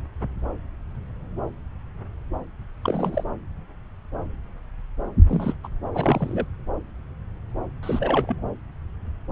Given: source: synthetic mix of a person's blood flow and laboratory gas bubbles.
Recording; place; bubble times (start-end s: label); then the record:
Doppler ultrasound of blood flow; subclavian vein
2.83-3.24 s: bubbles
5.28-5.55 s: bubbles
5.63-5.68 s: bubbles
5.93-6.46 s: bubbles
7.82-8.41 s: bubbles
From the record:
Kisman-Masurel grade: 222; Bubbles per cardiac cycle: several, 3 to 8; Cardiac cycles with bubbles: 10 to 50%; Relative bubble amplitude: moderate (0.250 to 0.450); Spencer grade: 2 (many but less than half of the cardiac periods contain bubble signals, singularly or in groups); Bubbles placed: anywhere in the cardiac cycle